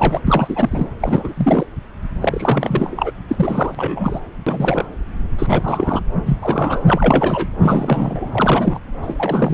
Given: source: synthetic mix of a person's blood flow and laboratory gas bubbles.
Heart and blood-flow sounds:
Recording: Doppler ultrasound of blood flow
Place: subclavian vein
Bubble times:
0.00-0.21 s: bubbles
0.27-0.90 s: bubbles
1.00-1.66 s: bubbles
2.21-3.11 s: bubbles
3.29-4.20 s: bubbles
4.46-4.88 s: bubbles
5.38-6.02 s: bubbles
6.25-6.38 s: bubbles
6.42-6.83 s: bubbles
6.87-7.49 s: bubbles
7.61-8.79 s: bubbles
9.02-9.54 s: bubbles
From the record:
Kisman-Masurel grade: 343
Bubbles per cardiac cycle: rolling drumbeat, 9 or more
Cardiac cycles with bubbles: 100%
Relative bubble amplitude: loud (0.450 to 0.775)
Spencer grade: 3 (all of the cardiac periods contain showers or single bubble signals, but not dominating or overriding the cardiac motion signals)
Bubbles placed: anywhere in the cardiac cycle

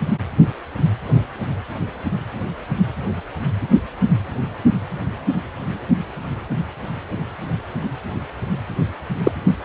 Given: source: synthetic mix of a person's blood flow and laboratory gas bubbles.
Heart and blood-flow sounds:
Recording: Doppler ultrasound of blood flow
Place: precordium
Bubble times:
9.24-9.32 s: bubbles
From the record:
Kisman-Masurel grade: 113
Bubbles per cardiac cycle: 1 to 2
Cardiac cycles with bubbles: 1 to 10%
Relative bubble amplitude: loud (0.450 to 0.775)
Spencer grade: 1 (occasional bubble signal discernible with the cardiac motion signal, with majority of cardiac periods free of bubbles)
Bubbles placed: anywhere in the cardiac cycle

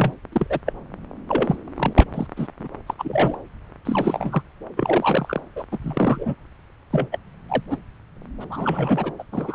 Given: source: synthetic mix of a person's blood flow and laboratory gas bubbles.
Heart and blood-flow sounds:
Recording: Doppler ultrasound of blood flow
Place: subclavian vein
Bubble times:
0.00-0.14 s: bubbles
0.32-0.59 s: bubbles
0.66-0.73 s: bubbles
1.28-1.55 s: bubbles
1.76-2.04 s: bubbles
2.13-2.27 s: bubbles
2.36-2.48 s: bubbles
2.59-2.68 s: bubbles
2.86-2.94 s: bubbles
2.98-3.39 s: bubbles
3.85-4.42 s: bubbles
4.76-5.41 s: bubbles
5.56-5.64 s: bubbles
5.71-5.78 s: bubbles
5.83-6.35 s: bubbles
6.91-7.08 s: bubbles
7.12-7.18 s: bubbles
7.49-7.63 s: bubbles
7.70-7.76 s: bubbles
8.41-8.45 s: bubbles
8.50-9.12 s: bubbles
9.19-9.23 s: bubbles
9.32-9.55 s: bubbles
From the record:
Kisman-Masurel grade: 242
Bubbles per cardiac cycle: several, 3 to 8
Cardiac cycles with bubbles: 100%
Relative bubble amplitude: moderate (0.250 to 0.450)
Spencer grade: 3 (all of the cardiac periods contain showers or single bubble signals, but not dominating or overriding the cardiac motion signals)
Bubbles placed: anywhere in the cardiac cycle

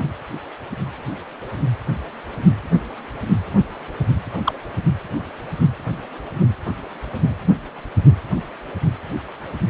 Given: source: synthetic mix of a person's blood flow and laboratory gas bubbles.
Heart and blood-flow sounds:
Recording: Doppler ultrasound of blood flow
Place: precordium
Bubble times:
0.00-0.04 s: bubbles
4.45-4.54 s: bubbles
From the record:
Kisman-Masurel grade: 122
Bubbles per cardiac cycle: 1 to 2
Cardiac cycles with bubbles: 10 to 50%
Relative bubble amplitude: moderate (0.250 to 0.450)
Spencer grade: 2 (many but less than half of the cardiac periods contain bubble signals, singularly or in groups)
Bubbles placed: anywhere in the cardiac cycle

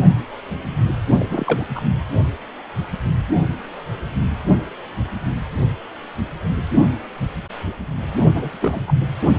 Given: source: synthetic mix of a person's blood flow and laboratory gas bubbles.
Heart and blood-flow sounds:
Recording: Doppler ultrasound of blood flow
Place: precordium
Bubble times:
1.20-1.25 s: bubbles
1.29-1.66 s: bubbles
1.74-1.82 s: bubbles
8.33-8.57 s: bubbles
8.60-8.85 s: bubbles
8.87-8.94 s: bubbles
From the record:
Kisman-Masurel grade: 222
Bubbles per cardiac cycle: several, 3 to 8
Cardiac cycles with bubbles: 10 to 50%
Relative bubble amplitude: moderate (0.250 to 0.450)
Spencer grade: 2 (many but less than half of the cardiac periods contain bubble signals, singularly or in groups)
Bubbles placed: anywhere in the cardiac cycle

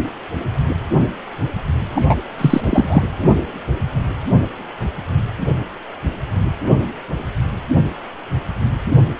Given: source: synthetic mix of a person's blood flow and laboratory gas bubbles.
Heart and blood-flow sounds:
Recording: Doppler ultrasound of blood flow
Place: precordium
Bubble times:
1.95-2.15 s: bubbles
2.38-2.61 s: bubbles
2.64-3.03 s: bubbles
From the record:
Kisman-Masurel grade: 223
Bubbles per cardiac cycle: several, 3 to 8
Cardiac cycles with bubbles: 10 to 50%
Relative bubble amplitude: loud (0.450 to 0.775)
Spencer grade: 2 (many but less than half of the cardiac periods contain bubble signals, singularly or in groups)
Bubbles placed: anywhere in the cardiac cycle

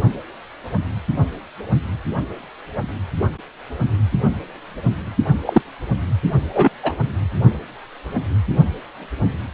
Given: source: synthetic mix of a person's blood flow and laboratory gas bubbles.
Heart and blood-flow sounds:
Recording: Doppler ultrasound of blood flow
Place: precordium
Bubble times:
5.46-5.62 s: bubbles
6.53-6.70 s: bubbles
6.83-6.92 s: bubbles
From the record:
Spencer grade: 2 (many but less than half of the cardiac periods contain bubble signals, singularly or in groups)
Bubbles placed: only in the low amplitude regions of the cardiac cycle

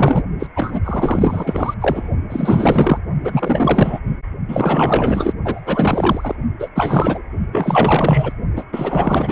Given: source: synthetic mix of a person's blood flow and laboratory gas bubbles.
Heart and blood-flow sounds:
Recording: Doppler ultrasound of blood flow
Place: precordium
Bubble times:
0.00-0.22 s: bubbles
0.39-0.46 s: bubbles
0.56-0.81 s: bubbles
0.84-1.74 s: bubbles
1.80-2.10 s: bubbles
2.29-2.99 s: bubbles
3.24-4.00 s: bubbles
4.48-5.34 s: bubbles
5.43-5.60 s: bubbles
5.65-6.35 s: bubbles
6.59-6.69 s: bubbles
6.75-7.22 s: bubbles
7.52-8.33 s: bubbles
8.56-8.64 s: bubbles
8.73-9.32 s: bubbles
From the record:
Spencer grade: 4 (maximum detectable bubble signal sounding continuously throughout systole and diastole of every cardiac period, and overriding the amplitude of the normal cardiac signals)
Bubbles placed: only in the low amplitude regions of the cardiac cycle

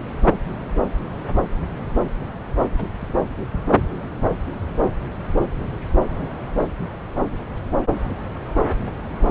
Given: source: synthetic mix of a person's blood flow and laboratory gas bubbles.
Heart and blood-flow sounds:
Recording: Doppler ultrasound of blood flow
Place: subclavian vein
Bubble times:
2.77-2.87 s: bubbles
2.99-3.15 s: bubbles
From the record:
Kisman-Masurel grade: 111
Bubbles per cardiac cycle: 1 to 2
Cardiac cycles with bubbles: 1 to 10%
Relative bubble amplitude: barely perceptible (0.100 to 0.250)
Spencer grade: 1 (occasional bubble signal discernible with the cardiac motion signal, with majority of cardiac periods free of bubbles)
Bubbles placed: anywhere in the cardiac cycle

